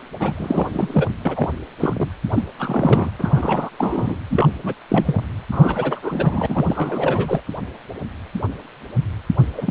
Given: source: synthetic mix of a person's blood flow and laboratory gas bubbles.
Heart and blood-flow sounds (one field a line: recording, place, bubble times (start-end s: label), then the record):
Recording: Doppler ultrasound of blood flow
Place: precordium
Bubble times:
0.20-0.34 s: bubbles
0.36-1.10 s: bubbles
1.25-1.49 s: bubbles
1.80-2.09 s: bubbles
2.31-2.44 s: bubbles
2.59-3.11 s: bubbles
3.19-3.70 s: bubbles
3.78-4.17 s: bubbles
4.30-4.49 s: bubbles
4.64-4.74 s: bubbles
4.89-5.24 s: bubbles
5.51-6.00 s: bubbles
6.03-7.41 s: bubbles
9.56-9.71 s: bubbles
From the record:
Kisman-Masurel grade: 332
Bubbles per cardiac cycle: rolling drumbeat, 9 or more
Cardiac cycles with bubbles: 50 to 99%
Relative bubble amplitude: moderate (0.250 to 0.450)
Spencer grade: 3 (all of the cardiac periods contain showers or single bubble signals, but not dominating or overriding the cardiac motion signals)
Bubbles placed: anywhere in the cardiac cycle